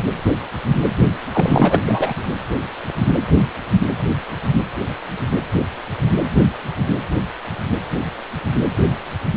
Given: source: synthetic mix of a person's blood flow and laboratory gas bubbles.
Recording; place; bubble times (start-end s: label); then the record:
Doppler ultrasound of blood flow; precordium
1.32-1.79 s: bubbles
1.84-2.14 s: bubbles
From the record:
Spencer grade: 1 (occasional bubble signal discernible with the cardiac motion signal, with majority of cardiac periods free of bubbles); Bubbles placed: anywhere in the cardiac cycle